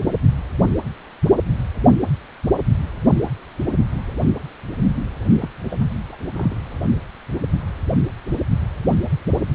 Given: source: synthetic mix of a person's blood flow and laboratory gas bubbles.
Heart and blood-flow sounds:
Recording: Doppler ultrasound of blood flow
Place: precordium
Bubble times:
5.38-5.48 s: bubbles
5.64-5.79 s: bubbles
6.12-6.16 s: bubbles
6.33-6.79 s: bubbles
From the record:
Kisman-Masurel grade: 211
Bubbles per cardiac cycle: several, 3 to 8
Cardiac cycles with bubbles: 1 to 10%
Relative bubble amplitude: barely perceptible (0.100 to 0.250)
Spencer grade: 1 (occasional bubble signal discernible with the cardiac motion signal, with majority of cardiac periods free of bubbles)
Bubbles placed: anywhere in the cardiac cycle

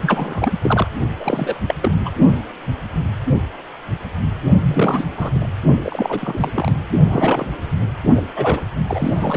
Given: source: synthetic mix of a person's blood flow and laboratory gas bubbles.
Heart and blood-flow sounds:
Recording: Doppler ultrasound of blood flow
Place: precordium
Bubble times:
0.02-0.53 s: bubbles
0.61-0.87 s: bubbles
1.20-1.59 s: bubbles
1.67-1.75 s: bubbles
1.82-1.92 s: bubbles
2.05-2.10 s: bubbles
4.62-5.06 s: bubbles
5.17-5.48 s: bubbles
5.81-6.51 s: bubbles
6.54-6.71 s: bubbles
7.09-7.45 s: bubbles
8.13-8.22 s: bubbles
8.36-8.62 s: bubbles
8.88-9.36 s: bubbles
From the record:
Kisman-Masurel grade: 332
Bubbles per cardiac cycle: rolling drumbeat, 9 or more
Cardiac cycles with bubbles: 50 to 99%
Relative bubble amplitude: moderate (0.250 to 0.450)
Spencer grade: 3 (all of the cardiac periods contain showers or single bubble signals, but not dominating or overriding the cardiac motion signals)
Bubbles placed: only in the low amplitude regions of the cardiac cycle

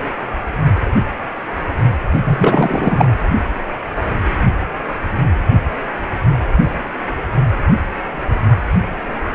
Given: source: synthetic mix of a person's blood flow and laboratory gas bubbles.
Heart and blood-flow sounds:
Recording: Doppler ultrasound of blood flow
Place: precordium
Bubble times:
2.23-3.14 s: bubbles
From the record:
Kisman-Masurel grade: 213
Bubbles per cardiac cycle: several, 3 to 8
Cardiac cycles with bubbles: 1 to 10%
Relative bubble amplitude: loud (0.450 to 0.775)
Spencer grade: 1 (occasional bubble signal discernible with the cardiac motion signal, with majority of cardiac periods free of bubbles)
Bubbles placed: anywhere in the cardiac cycle

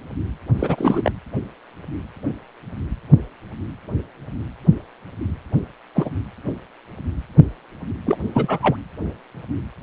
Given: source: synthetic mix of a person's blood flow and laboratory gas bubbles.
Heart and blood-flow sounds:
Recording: Doppler ultrasound of blood flow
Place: precordium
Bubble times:
0.59-1.11 s: bubbles
5.95-6.10 s: bubbles
8.05-8.17 s: bubbles
8.34-8.59 s: bubbles
8.62-8.77 s: bubbles
From the record:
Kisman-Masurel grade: 222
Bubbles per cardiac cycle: several, 3 to 8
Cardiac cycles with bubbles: 10 to 50%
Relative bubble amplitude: moderate (0.250 to 0.450)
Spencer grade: 2 (many but less than half of the cardiac periods contain bubble signals, singularly or in groups)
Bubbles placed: anywhere in the cardiac cycle

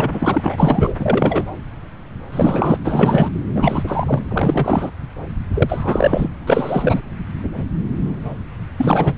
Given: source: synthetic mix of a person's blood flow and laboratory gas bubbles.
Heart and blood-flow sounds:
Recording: Doppler ultrasound of blood flow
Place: subclavian vein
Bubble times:
0.00-0.95 s: bubbles
0.99-1.46 s: bubbles
2.32-2.81 s: bubbles
2.84-3.30 s: bubbles
3.55-4.22 s: bubbles
4.29-4.91 s: bubbles
5.54-6.29 s: bubbles
6.46-7.01 s: bubbles
8.78-9.16 s: bubbles
From the record:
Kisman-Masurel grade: 333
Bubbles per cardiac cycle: rolling drumbeat, 9 or more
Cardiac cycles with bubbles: 50 to 99%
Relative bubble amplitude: loud (0.450 to 0.775)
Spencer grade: 3 (all of the cardiac periods contain showers or single bubble signals, but not dominating or overriding the cardiac motion signals)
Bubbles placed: anywhere in the cardiac cycle

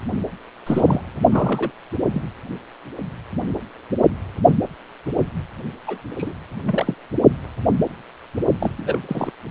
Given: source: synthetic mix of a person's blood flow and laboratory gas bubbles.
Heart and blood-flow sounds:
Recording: Doppler ultrasound of blood flow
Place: precordium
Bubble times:
0.67-1.01 s: bubbles
1.31-1.71 s: bubbles
2.12-2.23 s: bubbles
5.87-5.99 s: bubbles
6.18-6.34 s: bubbles
6.66-6.94 s: bubbles
8.60-8.72 s: bubbles
8.78-8.98 s: bubbles
9.08-9.30 s: bubbles
From the record:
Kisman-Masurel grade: 232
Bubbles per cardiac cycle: several, 3 to 8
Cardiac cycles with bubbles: 50 to 99%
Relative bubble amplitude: moderate (0.250 to 0.450)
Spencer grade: 3 (all of the cardiac periods contain showers or single bubble signals, but not dominating or overriding the cardiac motion signals)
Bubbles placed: only in the low amplitude regions of the cardiac cycle

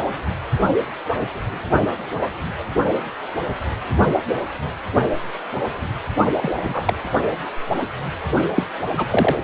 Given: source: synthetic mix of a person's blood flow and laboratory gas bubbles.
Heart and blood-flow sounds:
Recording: Doppler ultrasound of blood flow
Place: precordium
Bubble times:
6.36-6.93 s: bubbles
8.54-8.63 s: bubbles
8.97-9.07 s: bubbles
9.11-9.36 s: bubbles
From the record:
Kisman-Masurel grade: 222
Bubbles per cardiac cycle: several, 3 to 8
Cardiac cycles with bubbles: 10 to 50%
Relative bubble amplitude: moderate (0.250 to 0.450)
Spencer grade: 2 (many but less than half of the cardiac periods contain bubble signals, singularly or in groups)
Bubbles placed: only in the low amplitude regions of the cardiac cycle

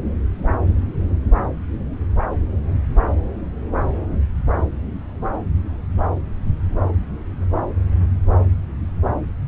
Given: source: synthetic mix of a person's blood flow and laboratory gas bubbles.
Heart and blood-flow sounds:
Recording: Doppler ultrasound of blood flow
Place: subclavian vein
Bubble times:
no bubbles
From the record:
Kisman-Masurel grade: 000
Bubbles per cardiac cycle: 0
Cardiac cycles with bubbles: 0%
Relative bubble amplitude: no bubbles discernible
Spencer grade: 0 (complete lack of bubble signals)

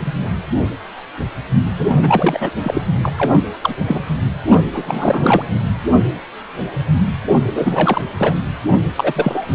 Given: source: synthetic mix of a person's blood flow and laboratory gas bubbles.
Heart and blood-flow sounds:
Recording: Doppler ultrasound of blood flow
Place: precordium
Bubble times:
0.05-0.14 s: bubbles
1.77-1.90 s: bubbles
1.96-2.50 s: bubbles
2.63-2.81 s: bubbles
3.02-3.14 s: bubbles
3.16-3.39 s: bubbles
3.61-3.75 s: bubbles
3.88-4.00 s: bubbles
4.47-4.62 s: bubbles
4.73-5.50 s: bubbles
7.45-8.02 s: bubbles
8.18-8.34 s: bubbles
8.68-8.73 s: bubbles
8.97-9.55 s: bubbles
From the record:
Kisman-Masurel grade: 333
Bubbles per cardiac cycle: rolling drumbeat, 9 or more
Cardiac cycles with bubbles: 50 to 99%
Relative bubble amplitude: loud (0.450 to 0.775)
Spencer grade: 3 (all of the cardiac periods contain showers or single bubble signals, but not dominating or overriding the cardiac motion signals)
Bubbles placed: anywhere in the cardiac cycle

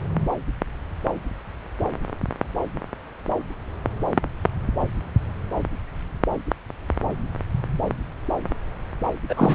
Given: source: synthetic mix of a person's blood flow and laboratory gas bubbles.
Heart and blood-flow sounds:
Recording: Doppler ultrasound of blood flow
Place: subclavian vein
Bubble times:
9.29-9.55 s: bubbles
From the record:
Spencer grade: 1 (occasional bubble signal discernible with the cardiac motion signal, with majority of cardiac periods free of bubbles)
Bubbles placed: anywhere in the cardiac cycle

